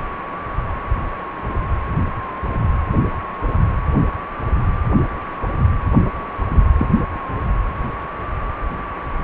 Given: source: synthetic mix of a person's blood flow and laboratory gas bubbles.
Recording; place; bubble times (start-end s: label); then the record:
Doppler ultrasound of blood flow; precordium
6.78-6.87 s: bubbles
From the record:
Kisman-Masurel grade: 112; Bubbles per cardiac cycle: 1 to 2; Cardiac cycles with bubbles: 1 to 10%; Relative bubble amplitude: moderate (0.250 to 0.450); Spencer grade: 1 (occasional bubble signal discernible with the cardiac motion signal, with majority of cardiac periods free of bubbles); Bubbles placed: anywhere in the cardiac cycle